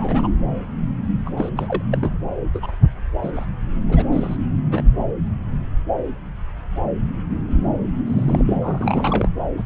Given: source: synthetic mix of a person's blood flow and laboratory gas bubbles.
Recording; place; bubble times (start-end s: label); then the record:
Doppler ultrasound of blood flow; subclavian vein
0.00-0.31 s: bubbles
1.26-1.29 s: bubbles
1.37-1.50 s: bubbles
1.56-1.81 s: bubbles
1.91-2.11 s: bubbles
2.53-2.75 s: bubbles
3.23-3.31 s: bubbles
3.35-3.46 s: bubbles
3.88-4.04 s: bubbles
4.12-4.37 s: bubbles
4.71-4.82 s: bubbles
8.05-8.42 s: bubbles
8.46-8.57 s: bubbles
8.61-9.29 s: bubbles
9.57-9.63 s: bubbles
From the record:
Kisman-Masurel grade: 232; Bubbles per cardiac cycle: several, 3 to 8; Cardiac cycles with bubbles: 50 to 99%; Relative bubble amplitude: moderate (0.250 to 0.450); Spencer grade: 3 (all of the cardiac periods contain showers or single bubble signals, but not dominating or overriding the cardiac motion signals); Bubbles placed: anywhere in the cardiac cycle